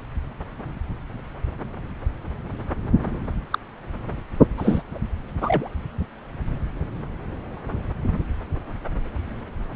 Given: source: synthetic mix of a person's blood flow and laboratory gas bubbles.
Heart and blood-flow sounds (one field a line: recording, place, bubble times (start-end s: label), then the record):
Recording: Doppler ultrasound of blood flow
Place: subclavian vein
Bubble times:
3.51-3.58 s: bubbles
4.57-4.82 s: bubbles
5.40-5.68 s: bubbles
From the record:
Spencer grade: 2 (many but less than half of the cardiac periods contain bubble signals, singularly or in groups)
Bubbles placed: anywhere in the cardiac cycle